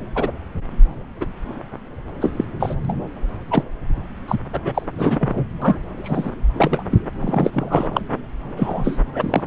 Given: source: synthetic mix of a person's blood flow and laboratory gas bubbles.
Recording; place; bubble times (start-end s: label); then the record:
Doppler ultrasound of blood flow; subclavian vein
0.15-0.31 s: bubbles
1.21-1.25 s: bubbles
2.21-2.32 s: bubbles
2.36-2.45 s: bubbles
2.60-2.75 s: bubbles
2.85-2.93 s: bubbles
3.50-3.63 s: bubbles
4.28-4.38 s: bubbles
4.53-4.83 s: bubbles
4.97-5.45 s: bubbles
5.62-5.78 s: bubbles
6.03-6.30 s: bubbles
6.57-6.84 s: bubbles
6.91-6.99 s: bubbles
7.21-7.50 s: bubbles
7.54-8.02 s: bubbles
8.56-8.99 s: bubbles
9.13-9.44 s: bubbles
From the record:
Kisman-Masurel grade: 243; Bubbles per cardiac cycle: several, 3 to 8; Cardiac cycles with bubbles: 100%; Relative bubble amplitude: loud (0.450 to 0.775); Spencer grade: 3 (all of the cardiac periods contain showers or single bubble signals, but not dominating or overriding the cardiac motion signals); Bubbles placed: anywhere in the cardiac cycle